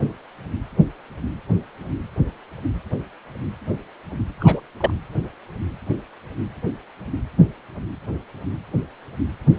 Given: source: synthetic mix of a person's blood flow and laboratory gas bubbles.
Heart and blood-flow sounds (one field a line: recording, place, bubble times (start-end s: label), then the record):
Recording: Doppler ultrasound of blood flow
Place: precordium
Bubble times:
4.40-4.61 s: bubbles
4.80-4.91 s: bubbles
From the record:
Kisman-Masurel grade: 112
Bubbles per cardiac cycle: 1 to 2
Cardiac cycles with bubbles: 1 to 10%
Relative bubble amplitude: moderate (0.250 to 0.450)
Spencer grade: 1 (occasional bubble signal discernible with the cardiac motion signal, with majority of cardiac periods free of bubbles)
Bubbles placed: anywhere in the cardiac cycle